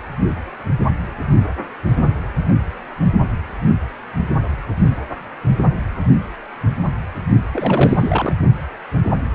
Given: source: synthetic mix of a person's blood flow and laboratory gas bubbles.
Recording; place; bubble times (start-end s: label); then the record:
Doppler ultrasound of blood flow; precordium
7.53-8.33 s: bubbles
From the record:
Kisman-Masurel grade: 212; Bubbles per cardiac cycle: several, 3 to 8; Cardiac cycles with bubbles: 1 to 10%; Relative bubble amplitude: moderate (0.250 to 0.450); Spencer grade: 1 (occasional bubble signal discernible with the cardiac motion signal, with majority of cardiac periods free of bubbles); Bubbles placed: only in the low amplitude regions of the cardiac cycle